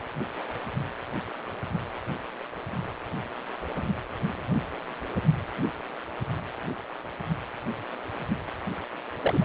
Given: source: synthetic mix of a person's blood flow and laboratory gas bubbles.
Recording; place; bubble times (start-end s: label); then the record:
Doppler ultrasound of blood flow; precordium
9.21-9.45 s: bubbles
From the record:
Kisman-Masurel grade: 121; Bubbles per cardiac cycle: 1 to 2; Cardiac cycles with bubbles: 10 to 50%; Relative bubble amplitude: barely perceptible (0.100 to 0.250); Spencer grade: 2 (many but less than half of the cardiac periods contain bubble signals, singularly or in groups); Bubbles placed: anywhere in the cardiac cycle